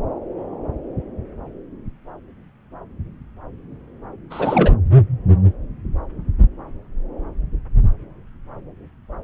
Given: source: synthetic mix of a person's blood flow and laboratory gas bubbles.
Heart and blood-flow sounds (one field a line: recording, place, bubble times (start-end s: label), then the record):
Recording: Doppler ultrasound of blood flow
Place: subclavian vein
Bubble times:
4.30-4.76 s: bubbles
From the record:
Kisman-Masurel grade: 212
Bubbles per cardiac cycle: several, 3 to 8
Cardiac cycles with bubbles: 1 to 10%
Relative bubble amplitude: moderate (0.250 to 0.450)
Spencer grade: 1 (occasional bubble signal discernible with the cardiac motion signal, with majority of cardiac periods free of bubbles)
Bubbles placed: anywhere in the cardiac cycle